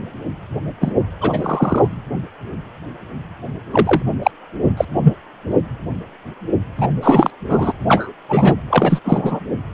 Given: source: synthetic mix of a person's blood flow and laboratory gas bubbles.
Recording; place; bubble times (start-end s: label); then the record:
Doppler ultrasound of blood flow; precordium
0.80-0.92 s: bubbles
1.21-1.87 s: bubbles
3.71-4.02 s: bubbles
4.23-4.31 s: bubbles
4.77-4.85 s: bubbles
5.03-5.14 s: bubbles
6.78-6.88 s: bubbles
7.02-7.31 s: bubbles
7.49-7.72 s: bubbles
7.88-8.12 s: bubbles
8.29-8.54 s: bubbles
8.70-8.99 s: bubbles
9.04-9.40 s: bubbles
From the record:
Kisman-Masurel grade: 233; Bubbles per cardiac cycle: several, 3 to 8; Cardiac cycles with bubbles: 50 to 99%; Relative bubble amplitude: loud (0.450 to 0.775); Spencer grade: 3 (all of the cardiac periods contain showers or single bubble signals, but not dominating or overriding the cardiac motion signals); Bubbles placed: anywhere in the cardiac cycle